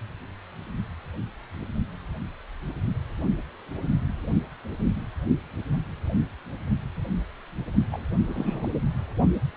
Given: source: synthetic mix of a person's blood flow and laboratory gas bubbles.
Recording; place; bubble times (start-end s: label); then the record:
Doppler ultrasound of blood flow; precordium
7.92-8.04 s: bubbles
8.29-8.68 s: bubbles
From the record:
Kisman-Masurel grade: 211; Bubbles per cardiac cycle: several, 3 to 8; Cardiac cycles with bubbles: 1 to 10%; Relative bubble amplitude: barely perceptible (0.100 to 0.250); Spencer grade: 1 (occasional bubble signal discernible with the cardiac motion signal, with majority of cardiac periods free of bubbles); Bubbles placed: only in the low amplitude regions of the cardiac cycle